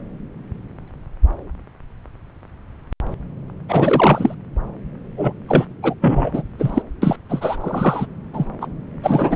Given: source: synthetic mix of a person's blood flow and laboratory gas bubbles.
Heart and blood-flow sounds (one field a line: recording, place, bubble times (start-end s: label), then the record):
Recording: Doppler ultrasound of blood flow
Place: subclavian vein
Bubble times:
3.68-4.34 s: bubbles
5.17-5.33 s: bubbles
5.48-5.65 s: bubbles
5.83-5.94 s: bubbles
6.01-6.30 s: bubbles
6.33-6.42 s: bubbles
6.58-6.82 s: bubbles
7.02-7.16 s: bubbles
7.29-7.56 s: bubbles
7.60-8.06 s: bubbles
8.33-8.46 s: bubbles
8.61-8.66 s: bubbles
9.03-9.36 s: bubbles
From the record:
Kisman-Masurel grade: 333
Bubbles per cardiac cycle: rolling drumbeat, 9 or more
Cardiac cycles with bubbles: 50 to 99%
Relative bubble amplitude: loud (0.450 to 0.775)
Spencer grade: 3 (all of the cardiac periods contain showers or single bubble signals, but not dominating or overriding the cardiac motion signals)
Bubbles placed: anywhere in the cardiac cycle